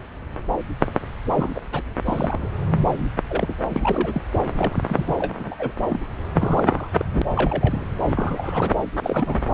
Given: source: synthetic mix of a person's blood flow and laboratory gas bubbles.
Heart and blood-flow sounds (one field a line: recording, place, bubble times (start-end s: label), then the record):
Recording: Doppler ultrasound of blood flow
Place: subclavian vein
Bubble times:
1.34-1.50 s: bubbles
1.54-1.60 s: bubbles
1.72-1.81 s: bubbles
2.06-2.50 s: bubbles
2.85-3.07 s: bubbles
3.29-3.54 s: bubbles
3.69-4.22 s: bubbles
4.57-4.76 s: bubbles
4.83-5.33 s: bubbles
5.39-5.56 s: bubbles
5.59-5.72 s: bubbles
5.89-6.00 s: bubbles
6.34-6.89 s: bubbles
6.97-7.05 s: bubbles
7.12-7.22 s: bubbles
7.35-7.86 s: bubbles
8.01-8.74 s: bubbles
9.00-9.43 s: bubbles
9.49-9.54 s: bubbles
From the record:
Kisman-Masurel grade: 232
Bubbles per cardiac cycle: several, 3 to 8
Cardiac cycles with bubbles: 50 to 99%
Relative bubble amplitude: moderate (0.250 to 0.450)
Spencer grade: 3 (all of the cardiac periods contain showers or single bubble signals, but not dominating or overriding the cardiac motion signals)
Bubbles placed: anywhere in the cardiac cycle